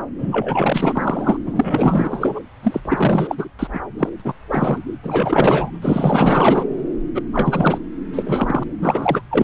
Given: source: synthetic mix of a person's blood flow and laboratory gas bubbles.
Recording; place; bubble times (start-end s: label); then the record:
Doppler ultrasound of blood flow; subclavian vein
0.18-1.37 s: bubbles
1.45-2.40 s: bubbles
2.63-2.80 s: bubbles
2.85-3.48 s: bubbles
3.59-3.67 s: bubbles
3.73-3.80 s: bubbles
3.97-4.09 s: bubbles
4.20-4.22 s: bubbles
4.25-4.33 s: bubbles
4.51-4.79 s: bubbles
5.03-5.71 s: bubbles
5.82-6.64 s: bubbles
7.14-7.22 s: bubbles
7.33-7.78 s: bubbles
8.12-8.63 s: bubbles
8.81-9.22 s: bubbles
9.30-9.44 s: bubbles
From the record:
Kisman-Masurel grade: 444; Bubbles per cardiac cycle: continuous sound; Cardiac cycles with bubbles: 100%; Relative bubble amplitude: maximal (0.775 to 0.999); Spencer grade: 4 (maximum detectable bubble signal sounding continuously throughout systole and diastole of every cardiac period, and overriding the amplitude of the normal cardiac signals); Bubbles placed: anywhere in the cardiac cycle